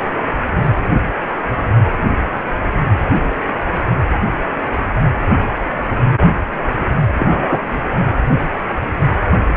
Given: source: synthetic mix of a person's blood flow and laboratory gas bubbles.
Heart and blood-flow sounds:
Doppler ultrasound of blood flow; precordium
7.17-7.60 s: bubbles
From the record:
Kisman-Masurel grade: 113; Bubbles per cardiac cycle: 1 to 2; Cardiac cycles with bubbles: 1 to 10%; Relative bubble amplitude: loud (0.450 to 0.775); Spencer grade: 1 (occasional bubble signal discernible with the cardiac motion signal, with majority of cardiac periods free of bubbles); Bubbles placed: anywhere in the cardiac cycle

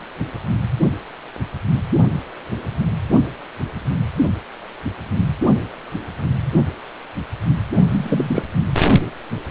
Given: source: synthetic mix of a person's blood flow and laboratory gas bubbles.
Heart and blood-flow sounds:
Doppler ultrasound of blood flow; precordium
7.88-8.43 s: bubbles
From the record:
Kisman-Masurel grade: 113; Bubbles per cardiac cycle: 1 to 2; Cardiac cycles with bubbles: 1 to 10%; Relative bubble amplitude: loud (0.450 to 0.775); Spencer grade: 1 (occasional bubble signal discernible with the cardiac motion signal, with majority of cardiac periods free of bubbles); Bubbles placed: only in the low amplitude regions of the cardiac cycle

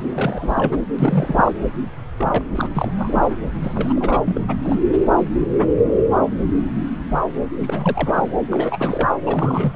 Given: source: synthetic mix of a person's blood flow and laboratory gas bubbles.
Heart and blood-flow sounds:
Doppler ultrasound of blood flow; subclavian vein
0.01-0.78 s: bubbles
0.98-1.52 s: bubbles
2.17-2.45 s: bubbles
2.55-2.69 s: bubbles
2.74-2.92 s: bubbles
2.98-3.38 s: bubbles
3.62-4.23 s: bubbles
4.25-4.40 s: bubbles
4.47-4.57 s: bubbles
4.62-4.77 s: bubbles
7.58-8.30 s: bubbles
8.50-9.08 s: bubbles
9.26-9.76 s: bubbles
From the record:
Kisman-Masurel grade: 332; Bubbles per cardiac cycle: rolling drumbeat, 9 or more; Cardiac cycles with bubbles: 50 to 99%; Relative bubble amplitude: moderate (0.250 to 0.450); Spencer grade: 3 (all of the cardiac periods contain showers or single bubble signals, but not dominating or overriding the cardiac motion signals); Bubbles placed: anywhere in the cardiac cycle

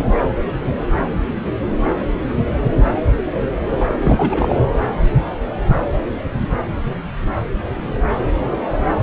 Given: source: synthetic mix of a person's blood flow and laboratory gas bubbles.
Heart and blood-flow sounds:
Doppler ultrasound of blood flow; subclavian vein
3.80-3.94 s: bubbles
4.03-4.55 s: bubbles
From the record:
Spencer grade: 1 (occasional bubble signal discernible with the cardiac motion signal, with majority of cardiac periods free of bubbles); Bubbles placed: anywhere in the cardiac cycle

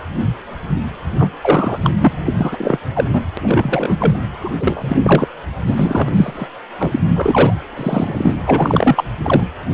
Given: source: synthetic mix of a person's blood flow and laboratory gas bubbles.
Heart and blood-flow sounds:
Doppler ultrasound of blood flow; precordium
1.19-1.30 s: bubbles
1.42-1.78 s: bubbles
1.81-1.92 s: bubbles
2.00-2.15 s: bubbles
2.25-2.33 s: bubbles
2.38-2.78 s: bubbles
2.94-3.08 s: bubbles
3.12-3.21 s: bubbles
3.37-4.18 s: bubbles
4.41-4.50 s: bubbles
4.58-5.26 s: bubbles
5.66-6.47 s: bubbles
6.79-7.00 s: bubbles
7.16-7.58 s: bubbles
7.76-8.37 s: bubbles
8.45-9.04 s: bubbles
9.22-9.47 s: bubbles
9.61-9.65 s: bubbles
From the record:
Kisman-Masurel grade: 333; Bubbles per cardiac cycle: rolling drumbeat, 9 or more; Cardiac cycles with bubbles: 50 to 99%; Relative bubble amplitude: loud (0.450 to 0.775); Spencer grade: 3 (all of the cardiac periods contain showers or single bubble signals, but not dominating or overriding the cardiac motion signals); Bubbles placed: anywhere in the cardiac cycle

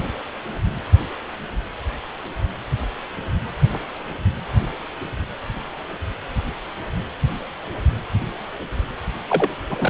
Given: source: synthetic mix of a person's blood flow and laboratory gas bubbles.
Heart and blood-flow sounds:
Doppler ultrasound of blood flow; precordium
9.29-9.49 s: bubbles
9.70-9.90 s: bubbles
From the record:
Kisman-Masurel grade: 212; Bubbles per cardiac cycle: several, 3 to 8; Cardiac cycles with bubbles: 1 to 10%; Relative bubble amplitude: moderate (0.250 to 0.450); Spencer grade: 1 (occasional bubble signal discernible with the cardiac motion signal, with majority of cardiac periods free of bubbles); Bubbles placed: anywhere in the cardiac cycle

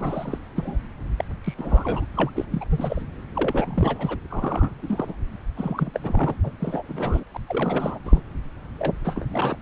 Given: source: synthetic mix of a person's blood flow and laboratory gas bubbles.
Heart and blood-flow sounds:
Doppler ultrasound of blood flow; subclavian vein
0.00-0.39 s: bubbles
0.56-0.78 s: bubbles
1.18-1.25 s: bubbles
1.44-1.54 s: bubbles
1.58-2.06 s: bubbles
2.15-2.30 s: bubbles
2.35-2.45 s: bubbles
2.52-2.65 s: bubbles
2.70-3.01 s: bubbles
3.35-4.17 s: bubbles
4.29-4.79 s: bubbles
4.82-5.14 s: bubbles
5.57-5.91 s: bubbles
5.94-6.00 s: bubbles
6.03-6.36 s: bubbles
6.44-6.51 s: bubbles
6.60-7.24 s: bubbles
7.34-7.37 s: bubbles
7.48-7.99 s: bubbles
8.04-8.21 s: bubbles
8.78-8.95 s: bubbles
9.04-9.25 s: bubbles
9.31-9.56 s: bubbles
From the record:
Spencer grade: 3 (all of the cardiac periods contain showers or single bubble signals, but not dominating or overriding the cardiac motion signals); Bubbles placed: anywhere in the cardiac cycle

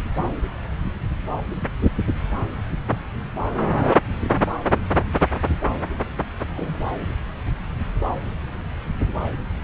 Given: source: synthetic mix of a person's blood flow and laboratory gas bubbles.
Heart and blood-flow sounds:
Doppler ultrasound of blood flow; subclavian vein
6.51-6.77 s: bubbles
From the record:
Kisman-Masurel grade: 211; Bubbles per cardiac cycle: several, 3 to 8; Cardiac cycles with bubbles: 1 to 10%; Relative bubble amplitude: barely perceptible (0.100 to 0.250); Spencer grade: 1 (occasional bubble signal discernible with the cardiac motion signal, with majority of cardiac periods free of bubbles); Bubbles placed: anywhere in the cardiac cycle

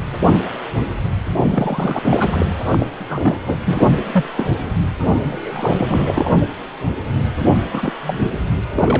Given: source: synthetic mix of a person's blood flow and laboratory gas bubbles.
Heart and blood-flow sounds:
Doppler ultrasound of blood flow; precordium
1.40-1.99 s: bubbles
2.05-2.46 s: bubbles
2.71-3.38 s: bubbles
3.46-3.57 s: bubbles
3.65-3.88 s: bubbles
4.12-4.25 s: bubbles
4.37-4.46 s: bubbles
5.28-6.36 s: bubbles
7.71-7.93 s: bubbles
8.06-8.28 s: bubbles
8.75-9.00 s: bubbles
From the record:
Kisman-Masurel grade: 232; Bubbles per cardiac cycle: several, 3 to 8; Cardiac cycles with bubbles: 50 to 99%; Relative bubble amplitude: moderate (0.250 to 0.450); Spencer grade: 3 (all of the cardiac periods contain showers or single bubble signals, but not dominating or overriding the cardiac motion signals); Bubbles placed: anywhere in the cardiac cycle

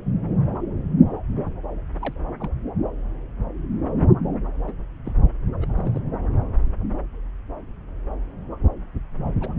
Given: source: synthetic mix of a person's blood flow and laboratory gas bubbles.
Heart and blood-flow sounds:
Doppler ultrasound of blood flow; subclavian vein
2.02-2.14 s: bubbles
2.40-2.49 s: bubbles
4.67-4.72 s: bubbles
5.05-5.13 s: bubbles
5.61-5.66 s: bubbles
5.76-6.01 s: bubbles
9.40-9.51 s: bubbles
From the record:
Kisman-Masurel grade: 121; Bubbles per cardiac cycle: 1 to 2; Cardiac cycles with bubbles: 10 to 50%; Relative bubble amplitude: barely perceptible (0.100 to 0.250); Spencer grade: 2 (many but less than half of the cardiac periods contain bubble signals, singularly or in groups); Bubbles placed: anywhere in the cardiac cycle

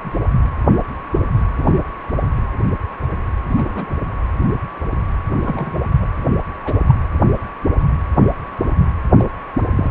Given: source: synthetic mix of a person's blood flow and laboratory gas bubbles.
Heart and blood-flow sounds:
Doppler ultrasound of blood flow; precordium
0.04-0.11 s: bubbles
1.56-1.80 s: bubbles
3.56-3.98 s: bubbles
5.43-5.81 s: bubbles
6.01-6.07 s: bubbles
6.65-6.80 s: bubbles
6.88-6.95 s: bubbles
9.18-9.24 s: bubbles
9.75-9.91 s: bubbles
From the record:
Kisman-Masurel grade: 122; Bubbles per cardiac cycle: 1 to 2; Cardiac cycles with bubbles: 10 to 50%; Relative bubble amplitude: moderate (0.250 to 0.450); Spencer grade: 2 (many but less than half of the cardiac periods contain bubble signals, singularly or in groups); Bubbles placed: anywhere in the cardiac cycle

